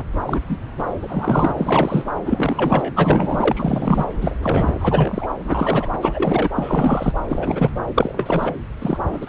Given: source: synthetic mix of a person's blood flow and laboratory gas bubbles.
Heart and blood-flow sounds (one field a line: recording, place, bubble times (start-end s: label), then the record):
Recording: Doppler ultrasound of blood flow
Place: subclavian vein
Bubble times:
0.12-0.40 s: bubbles
0.49-0.58 s: bubbles
0.77-0.89 s: bubbles
1.02-1.52 s: bubbles
1.56-2.06 s: bubbles
2.26-2.93 s: bubbles
2.96-4.04 s: bubbles
4.21-5.29 s: bubbles
5.44-5.88 s: bubbles
6.01-6.48 s: bubbles
6.55-7.13 s: bubbles
7.29-7.71 s: bubbles
7.94-8.54 s: bubbles
8.80-8.98 s: bubbles
9.12-9.29 s: bubbles
From the record:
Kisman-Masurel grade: 342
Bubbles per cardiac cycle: rolling drumbeat, 9 or more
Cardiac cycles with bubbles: 100%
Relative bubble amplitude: moderate (0.250 to 0.450)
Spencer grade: 3 (all of the cardiac periods contain showers or single bubble signals, but not dominating or overriding the cardiac motion signals)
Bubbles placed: anywhere in the cardiac cycle